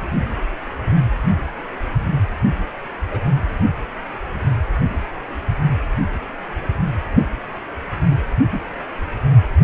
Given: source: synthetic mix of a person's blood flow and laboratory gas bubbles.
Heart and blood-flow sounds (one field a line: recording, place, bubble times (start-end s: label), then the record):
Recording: Doppler ultrasound of blood flow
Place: precordium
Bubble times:
3.10-3.21 s: bubbles
7.16-7.24 s: bubbles
8.10-8.15 s: bubbles
8.50-8.60 s: bubbles
From the record:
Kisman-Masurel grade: 121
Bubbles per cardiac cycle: 1 to 2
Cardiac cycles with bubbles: 10 to 50%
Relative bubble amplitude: barely perceptible (0.100 to 0.250)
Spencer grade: 2 (many but less than half of the cardiac periods contain bubble signals, singularly or in groups)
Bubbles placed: anywhere in the cardiac cycle